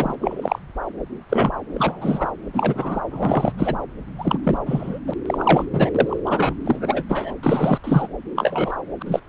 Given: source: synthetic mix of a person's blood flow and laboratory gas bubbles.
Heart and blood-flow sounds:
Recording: Doppler ultrasound of blood flow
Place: subclavian vein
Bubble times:
0.00-0.15 s: bubbles
0.20-0.59 s: bubbles
1.29-1.50 s: bubbles
1.74-2.31 s: bubbles
2.53-3.02 s: bubbles
3.10-3.52 s: bubbles
3.58-3.76 s: bubbles
4.18-4.38 s: bubbles
4.43-4.57 s: bubbles
4.65-4.99 s: bubbles
5.06-5.14 s: bubbles
5.26-5.64 s: bubbles
5.72-5.91 s: bubbles
5.94-6.19 s: bubbles
6.25-6.54 s: bubbles
6.64-7.04 s: bubbles
7.09-7.33 s: bubbles
7.43-7.79 s: bubbles
7.83-8.07 s: bubbles
8.36-8.75 s: bubbles
9.00-9.03 s: bubbles
9.05-9.21 s: bubbles
From the record:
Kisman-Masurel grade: 243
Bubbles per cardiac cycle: several, 3 to 8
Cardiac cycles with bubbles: 100%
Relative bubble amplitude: loud (0.450 to 0.775)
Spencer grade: 3 (all of the cardiac periods contain showers or single bubble signals, but not dominating or overriding the cardiac motion signals)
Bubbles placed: anywhere in the cardiac cycle

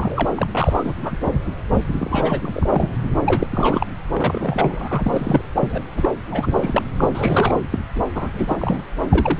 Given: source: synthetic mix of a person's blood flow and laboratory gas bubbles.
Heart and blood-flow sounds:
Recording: Doppler ultrasound of blood flow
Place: subclavian vein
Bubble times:
0.00-0.28 s: bubbles
0.35-0.47 s: bubbles
0.53-0.95 s: bubbles
1.02-1.17 s: bubbles
1.32-1.39 s: bubbles
1.98-2.97 s: bubbles
3.19-3.47 s: bubbles
3.51-3.87 s: bubbles
4.13-5.45 s: bubbles
5.54-5.83 s: bubbles
5.96-6.09 s: bubbles
6.32-6.83 s: bubbles
6.98-7.09 s: bubbles
7.14-7.65 s: bubbles
7.71-7.79 s: bubbles
7.96-8.01 s: bubbles
8.14-8.82 s: bubbles
9.09-9.39 s: bubbles
From the record:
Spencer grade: 3 (all of the cardiac periods contain showers or single bubble signals, but not dominating or overriding the cardiac motion signals)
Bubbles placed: anywhere in the cardiac cycle

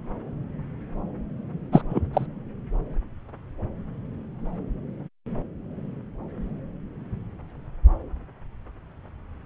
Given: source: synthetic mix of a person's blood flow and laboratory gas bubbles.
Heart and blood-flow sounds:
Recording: Doppler ultrasound of blood flow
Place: subclavian vein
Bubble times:
1.72-1.81 s: bubbles
1.89-2.02 s: bubbles
2.13-2.26 s: bubbles
From the record:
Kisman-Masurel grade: 213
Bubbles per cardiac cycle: several, 3 to 8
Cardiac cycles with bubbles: 1 to 10%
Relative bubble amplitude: loud (0.450 to 0.775)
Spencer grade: 1 (occasional bubble signal discernible with the cardiac motion signal, with majority of cardiac periods free of bubbles)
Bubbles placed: anywhere in the cardiac cycle

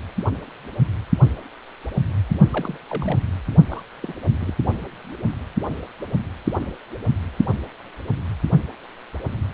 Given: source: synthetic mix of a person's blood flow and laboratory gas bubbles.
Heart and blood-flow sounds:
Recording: Doppler ultrasound of blood flow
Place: precordium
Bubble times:
2.50-2.77 s: bubbles
2.89-3.19 s: bubbles
3.69-3.83 s: bubbles
4.02-4.13 s: bubbles
4.40-4.54 s: bubbles
From the record:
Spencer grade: 2 (many but less than half of the cardiac periods contain bubble signals, singularly or in groups)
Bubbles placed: anywhere in the cardiac cycle

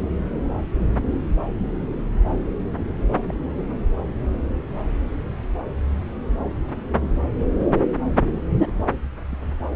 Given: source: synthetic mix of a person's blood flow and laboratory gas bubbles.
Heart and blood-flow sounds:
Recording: Doppler ultrasound of blood flow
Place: subclavian vein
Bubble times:
3.27-3.34 s: bubbles
8.52-8.74 s: bubbles
9.29-9.38 s: bubbles
From the record:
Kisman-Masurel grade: 121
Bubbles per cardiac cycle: 1 to 2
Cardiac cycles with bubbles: 10 to 50%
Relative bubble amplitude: barely perceptible (0.100 to 0.250)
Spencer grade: 2 (many but less than half of the cardiac periods contain bubble signals, singularly or in groups)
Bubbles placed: anywhere in the cardiac cycle

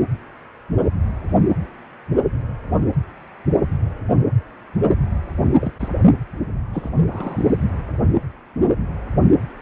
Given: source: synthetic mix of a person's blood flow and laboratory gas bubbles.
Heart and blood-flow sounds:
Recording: Doppler ultrasound of blood flow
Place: precordium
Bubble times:
5.42-5.72 s: bubbles
5.79-5.88 s: bubbles
6.73-6.90 s: bubbles
7.00-7.57 s: bubbles
From the record:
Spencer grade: 2 (many but less than half of the cardiac periods contain bubble signals, singularly or in groups)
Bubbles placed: anywhere in the cardiac cycle

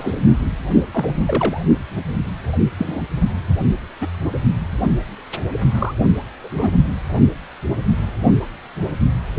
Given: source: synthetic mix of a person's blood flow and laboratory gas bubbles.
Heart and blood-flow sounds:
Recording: Doppler ultrasound of blood flow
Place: precordium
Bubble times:
0.00-0.15 s: bubbles
0.93-1.60 s: bubbles
2.78-3.02 s: bubbles
4.01-4.08 s: bubbles
5.79-5.93 s: bubbles
6.40-6.72 s: bubbles
From the record:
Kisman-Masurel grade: 123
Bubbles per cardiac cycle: 1 to 2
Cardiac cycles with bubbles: 10 to 50%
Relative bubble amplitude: loud (0.450 to 0.775)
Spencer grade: 2 (many but less than half of the cardiac periods contain bubble signals, singularly or in groups)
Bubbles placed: only in the low amplitude regions of the cardiac cycle

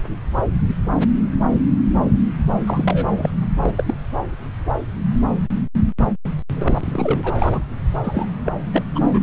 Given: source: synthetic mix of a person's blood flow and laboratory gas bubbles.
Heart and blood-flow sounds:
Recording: Doppler ultrasound of blood flow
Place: subclavian vein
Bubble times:
2.67-3.31 s: bubbles
3.62-3.75 s: bubbles
3.78-3.94 s: bubbles
6.56-7.66 s: bubbles
8.03-8.25 s: bubbles
8.46-8.52 s: bubbles
8.72-8.82 s: bubbles
8.95-8.99 s: bubbles
9.09-9.19 s: bubbles
From the record:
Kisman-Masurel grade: 332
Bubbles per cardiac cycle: rolling drumbeat, 9 or more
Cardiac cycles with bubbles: 50 to 99%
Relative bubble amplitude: moderate (0.250 to 0.450)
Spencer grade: 3 (all of the cardiac periods contain showers or single bubble signals, but not dominating or overriding the cardiac motion signals)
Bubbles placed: anywhere in the cardiac cycle

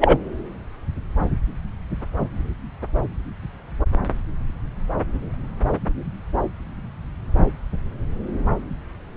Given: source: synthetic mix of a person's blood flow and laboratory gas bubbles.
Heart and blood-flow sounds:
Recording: Doppler ultrasound of blood flow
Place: subclavian vein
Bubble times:
0.00-0.17 s: bubbles
From the record:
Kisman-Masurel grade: 213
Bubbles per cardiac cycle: several, 3 to 8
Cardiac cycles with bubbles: 1 to 10%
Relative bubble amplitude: loud (0.450 to 0.775)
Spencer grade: 1 (occasional bubble signal discernible with the cardiac motion signal, with majority of cardiac periods free of bubbles)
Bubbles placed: anywhere in the cardiac cycle

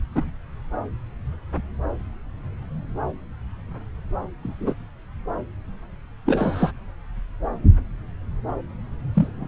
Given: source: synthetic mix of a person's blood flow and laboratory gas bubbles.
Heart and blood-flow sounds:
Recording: Doppler ultrasound of blood flow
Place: subclavian vein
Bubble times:
0.15-0.31 s: bubbles
4.42-4.75 s: bubbles
6.25-6.71 s: bubbles
9.13-9.48 s: bubbles
From the record:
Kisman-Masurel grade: 123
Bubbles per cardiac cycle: 1 to 2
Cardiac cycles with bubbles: 10 to 50%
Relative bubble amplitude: loud (0.450 to 0.775)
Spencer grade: 2 (many but less than half of the cardiac periods contain bubble signals, singularly or in groups)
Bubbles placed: anywhere in the cardiac cycle

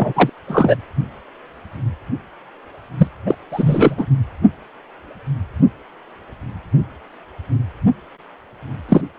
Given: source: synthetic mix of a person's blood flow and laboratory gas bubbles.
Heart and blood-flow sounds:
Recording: Doppler ultrasound of blood flow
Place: precordium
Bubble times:
0.00-0.30 s: bubbles
0.47-0.76 s: bubbles
2.98-3.07 s: bubbles
3.26-3.35 s: bubbles
3.51-4.07 s: bubbles
8.88-9.01 s: bubbles
From the record:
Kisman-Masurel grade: 223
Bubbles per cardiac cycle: several, 3 to 8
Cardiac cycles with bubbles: 10 to 50%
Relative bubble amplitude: loud (0.450 to 0.775)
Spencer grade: 2 (many but less than half of the cardiac periods contain bubble signals, singularly or in groups)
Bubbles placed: anywhere in the cardiac cycle

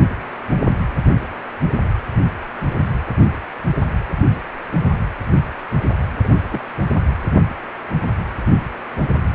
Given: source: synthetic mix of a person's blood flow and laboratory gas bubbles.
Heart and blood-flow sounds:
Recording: Doppler ultrasound of blood flow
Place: precordium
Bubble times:
0.68-0.77 s: bubbles
6.22-6.31 s: bubbles
6.52-6.61 s: bubbles
9.03-9.09 s: bubbles
From the record:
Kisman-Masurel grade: 121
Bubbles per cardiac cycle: 1 to 2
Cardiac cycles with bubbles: 10 to 50%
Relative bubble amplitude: barely perceptible (0.100 to 0.250)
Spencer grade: 2 (many but less than half of the cardiac periods contain bubble signals, singularly or in groups)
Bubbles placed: anywhere in the cardiac cycle

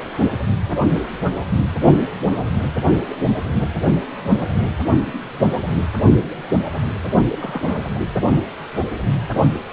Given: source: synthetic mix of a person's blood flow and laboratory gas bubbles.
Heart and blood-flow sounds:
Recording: Doppler ultrasound of blood flow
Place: precordium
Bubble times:
7.29-7.90 s: bubbles
7.95-8.08 s: bubbles
From the record:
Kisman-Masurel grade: 211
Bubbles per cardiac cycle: several, 3 to 8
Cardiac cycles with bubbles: 1 to 10%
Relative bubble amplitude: barely perceptible (0.100 to 0.250)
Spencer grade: 1 (occasional bubble signal discernible with the cardiac motion signal, with majority of cardiac periods free of bubbles)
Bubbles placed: only in the low amplitude regions of the cardiac cycle

